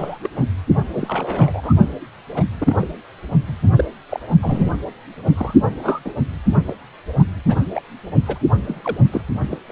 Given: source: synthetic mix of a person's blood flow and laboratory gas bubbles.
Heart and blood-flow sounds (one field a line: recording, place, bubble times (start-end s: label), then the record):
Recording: Doppler ultrasound of blood flow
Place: precordium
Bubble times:
0.00-0.18 s: bubbles
0.23-0.30 s: bubbles
0.36-0.43 s: bubbles
0.92-1.73 s: bubbles
2.31-2.44 s: bubbles
2.60-2.92 s: bubbles
3.48-3.56 s: bubbles
3.62-3.84 s: bubbles
4.10-4.20 s: bubbles
4.42-4.72 s: bubbles
5.25-5.55 s: bubbles
5.82-6.00 s: bubbles
6.04-6.12 s: bubbles
6.67-6.74 s: bubbles
7.19-7.24 s: bubbles
7.47-7.55 s: bubbles
7.74-7.82 s: bubbles
8.26-8.39 s: bubbles
8.67-9.05 s: bubbles
9.11-9.22 s: bubbles
9.50-9.59 s: bubbles
9.69-9.72 s: bubbles
From the record:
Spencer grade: 3 (all of the cardiac periods contain showers or single bubble signals, but not dominating or overriding the cardiac motion signals)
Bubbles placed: only in the low amplitude regions of the cardiac cycle